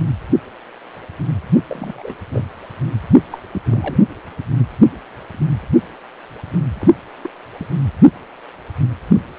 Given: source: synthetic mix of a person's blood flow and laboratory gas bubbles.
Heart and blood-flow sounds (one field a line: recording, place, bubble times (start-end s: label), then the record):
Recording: Doppler ultrasound of blood flow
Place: precordium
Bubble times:
1.69-2.15 s: bubbles
2.32-2.45 s: bubbles
3.31-3.39 s: bubbles
3.52-3.62 s: bubbles
3.64-4.04 s: bubbles
6.79-6.87 s: bubbles
7.23-7.29 s: bubbles
7.58-7.66 s: bubbles
From the record:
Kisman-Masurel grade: 221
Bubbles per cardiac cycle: several, 3 to 8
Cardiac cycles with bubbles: 10 to 50%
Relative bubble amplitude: barely perceptible (0.100 to 0.250)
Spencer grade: 2 (many but less than half of the cardiac periods contain bubble signals, singularly or in groups)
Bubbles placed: anywhere in the cardiac cycle